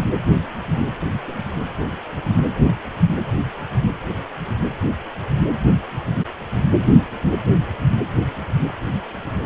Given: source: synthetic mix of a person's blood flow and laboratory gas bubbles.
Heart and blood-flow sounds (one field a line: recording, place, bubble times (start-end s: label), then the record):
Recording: Doppler ultrasound of blood flow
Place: precordium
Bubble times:
no bubbles
From the record:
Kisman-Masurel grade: 000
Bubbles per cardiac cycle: 0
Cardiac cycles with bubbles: 0%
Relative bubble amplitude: no bubbles discernible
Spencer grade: 0 (complete lack of bubble signals)